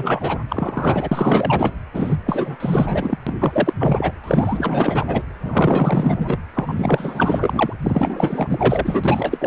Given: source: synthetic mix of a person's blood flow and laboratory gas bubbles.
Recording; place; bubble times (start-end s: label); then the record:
Doppler ultrasound of blood flow; precordium
0.00-0.39 s: bubbles
0.49-1.73 s: bubbles
1.94-2.17 s: bubbles
2.26-2.56 s: bubbles
2.60-3.18 s: bubbles
3.27-3.35 s: bubbles
3.40-3.74 s: bubbles
3.79-4.12 s: bubbles
4.24-5.22 s: bubbles
5.42-6.38 s: bubbles
6.54-7.73 s: bubbles
7.83-9.47 s: bubbles
From the record:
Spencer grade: 4 (maximum detectable bubble signal sounding continuously throughout systole and diastole of every cardiac period, and overriding the amplitude of the normal cardiac signals); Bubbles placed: anywhere in the cardiac cycle